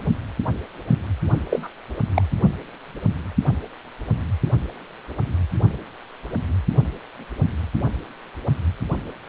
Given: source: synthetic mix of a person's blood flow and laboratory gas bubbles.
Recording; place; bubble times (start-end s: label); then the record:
Doppler ultrasound of blood flow; precordium
1.51-1.69 s: bubbles
2.15-2.22 s: bubbles
From the record:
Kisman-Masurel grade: 112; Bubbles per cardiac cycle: 1 to 2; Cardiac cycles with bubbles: 1 to 10%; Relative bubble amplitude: moderate (0.250 to 0.450); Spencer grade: 1 (occasional bubble signal discernible with the cardiac motion signal, with majority of cardiac periods free of bubbles); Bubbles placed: only in the low amplitude regions of the cardiac cycle